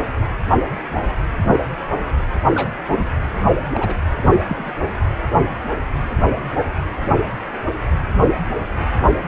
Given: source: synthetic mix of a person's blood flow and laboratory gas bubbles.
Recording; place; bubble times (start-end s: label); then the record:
Doppler ultrasound of blood flow; precordium
2.54-2.72 s: bubbles
2.88-3.05 s: bubbles
3.75-3.94 s: bubbles
4.25-4.44 s: bubbles
4.48-4.71 s: bubbles
From the record:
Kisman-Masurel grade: 222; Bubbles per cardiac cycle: several, 3 to 8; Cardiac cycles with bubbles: 10 to 50%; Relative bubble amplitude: moderate (0.250 to 0.450); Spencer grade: 2 (many but less than half of the cardiac periods contain bubble signals, singularly or in groups); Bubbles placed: anywhere in the cardiac cycle